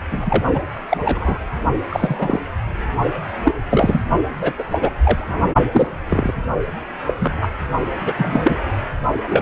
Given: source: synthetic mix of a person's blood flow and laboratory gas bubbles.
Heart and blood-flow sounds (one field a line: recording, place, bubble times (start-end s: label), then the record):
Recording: Doppler ultrasound of blood flow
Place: precordium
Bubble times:
0.11-0.61 s: bubbles
0.89-0.97 s: bubbles
1.05-1.38 s: bubbles
1.90-2.40 s: bubbles
3.44-3.53 s: bubbles
3.70-4.01 s: bubbles
4.42-4.53 s: bubbles
4.58-4.64 s: bubbles
4.71-4.91 s: bubbles
5.03-5.53 s: bubbles
5.72-5.89 s: bubbles
6.10-6.33 s: bubbles
7.07-7.14 s: bubbles
7.20-7.33 s: bubbles
7.41-7.48 s: bubbles
8.05-8.13 s: bubbles
8.17-8.58 s: bubbles
9.28-9.42 s: bubbles
From the record:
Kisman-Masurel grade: 243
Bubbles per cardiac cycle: several, 3 to 8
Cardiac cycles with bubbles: 100%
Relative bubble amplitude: loud (0.450 to 0.775)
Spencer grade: 3 (all of the cardiac periods contain showers or single bubble signals, but not dominating or overriding the cardiac motion signals)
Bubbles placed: only in the low amplitude regions of the cardiac cycle